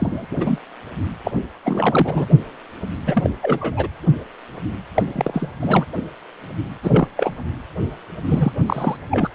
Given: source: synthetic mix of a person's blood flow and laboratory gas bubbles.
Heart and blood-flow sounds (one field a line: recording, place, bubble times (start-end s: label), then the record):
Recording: Doppler ultrasound of blood flow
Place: precordium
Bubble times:
0.00-0.27 s: bubbles
0.31-0.36 s: bubbles
0.40-0.58 s: bubbles
1.24-1.31 s: bubbles
1.65-2.26 s: bubbles
3.06-3.30 s: bubbles
3.41-3.88 s: bubbles
4.94-5.48 s: bubbles
5.60-5.86 s: bubbles
6.83-7.08 s: bubbles
7.17-7.35 s: bubbles
8.27-8.53 s: bubbles
8.66-8.96 s: bubbles
9.11-9.29 s: bubbles
From the record:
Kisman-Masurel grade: 332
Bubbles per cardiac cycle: rolling drumbeat, 9 or more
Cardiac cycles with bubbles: 50 to 99%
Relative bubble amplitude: moderate (0.250 to 0.450)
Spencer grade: 3 (all of the cardiac periods contain showers or single bubble signals, but not dominating or overriding the cardiac motion signals)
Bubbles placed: anywhere in the cardiac cycle